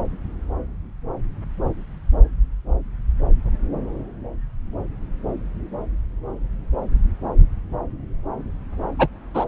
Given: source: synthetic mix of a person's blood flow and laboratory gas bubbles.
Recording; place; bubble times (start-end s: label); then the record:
Doppler ultrasound of blood flow; subclavian vein
8.98-9.07 s: bubbles
9.34-9.45 s: bubbles
From the record:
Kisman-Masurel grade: 113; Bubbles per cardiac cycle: 1 to 2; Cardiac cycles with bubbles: 1 to 10%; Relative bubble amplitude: loud (0.450 to 0.775); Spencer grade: 1 (occasional bubble signal discernible with the cardiac motion signal, with majority of cardiac periods free of bubbles); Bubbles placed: anywhere in the cardiac cycle